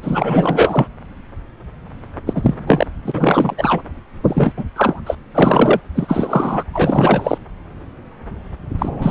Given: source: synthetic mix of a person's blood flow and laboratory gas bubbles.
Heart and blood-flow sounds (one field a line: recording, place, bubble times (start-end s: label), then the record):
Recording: Doppler ultrasound of blood flow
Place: subclavian vein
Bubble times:
0.02-0.88 s: bubbles
2.26-2.54 s: bubbles
2.67-2.87 s: bubbles
3.05-3.54 s: bubbles
3.57-3.81 s: bubbles
4.24-4.52 s: bubbles
4.56-4.64 s: bubbles
4.76-5.00 s: bubbles
5.06-5.15 s: bubbles
5.34-5.80 s: bubbles
5.95-6.63 s: bubbles
6.72-7.38 s: bubbles
8.78-9.11 s: bubbles
From the record:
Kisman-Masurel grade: 333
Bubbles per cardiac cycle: rolling drumbeat, 9 or more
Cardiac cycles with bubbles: 50 to 99%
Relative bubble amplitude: loud (0.450 to 0.775)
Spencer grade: 3 (all of the cardiac periods contain showers or single bubble signals, but not dominating or overriding the cardiac motion signals)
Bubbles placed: anywhere in the cardiac cycle